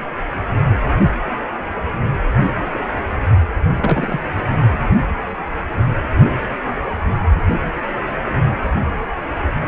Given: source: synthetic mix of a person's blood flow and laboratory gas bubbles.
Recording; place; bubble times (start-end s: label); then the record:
Doppler ultrasound of blood flow; precordium
3.70-4.19 s: bubbles
4.60-4.82 s: bubbles
From the record:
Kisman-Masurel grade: 112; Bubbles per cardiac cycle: 1 to 2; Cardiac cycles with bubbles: 1 to 10%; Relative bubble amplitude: moderate (0.250 to 0.450); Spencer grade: 1 (occasional bubble signal discernible with the cardiac motion signal, with majority of cardiac periods free of bubbles); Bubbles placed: anywhere in the cardiac cycle